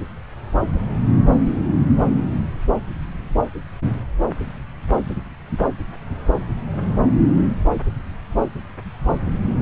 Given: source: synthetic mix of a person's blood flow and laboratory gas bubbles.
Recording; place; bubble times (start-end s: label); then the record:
Doppler ultrasound of blood flow; subclavian vein
no bubbles
From the record:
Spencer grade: 0 (complete lack of bubble signals)